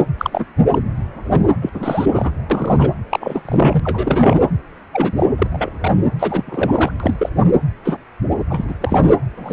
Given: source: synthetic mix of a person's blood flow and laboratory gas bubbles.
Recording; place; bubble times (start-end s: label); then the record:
Doppler ultrasound of blood flow; precordium
0.18-0.45 s: bubbles
0.70-0.78 s: bubbles
1.32-1.48 s: bubbles
1.61-1.70 s: bubbles
1.74-2.30 s: bubbles
2.50-2.89 s: bubbles
3.10-3.42 s: bubbles
3.45-3.80 s: bubbles
3.84-4.48 s: bubbles
4.92-5.26 s: bubbles
5.38-5.46 s: bubbles
5.52-5.69 s: bubbles
5.81-5.92 s: bubbles
6.19-6.43 s: bubbles
6.46-6.92 s: bubbles
7.00-7.29 s: bubbles
7.36-7.43 s: bubbles
7.84-7.97 s: bubbles
8.50-8.65 s: bubbles
8.67-8.74 s: bubbles
8.80-9.16 s: bubbles
9.37-9.53 s: bubbles
From the record:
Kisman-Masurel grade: 242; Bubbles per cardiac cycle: several, 3 to 8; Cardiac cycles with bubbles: 100%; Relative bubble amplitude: moderate (0.250 to 0.450); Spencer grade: 3 (all of the cardiac periods contain showers or single bubble signals, but not dominating or overriding the cardiac motion signals); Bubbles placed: anywhere in the cardiac cycle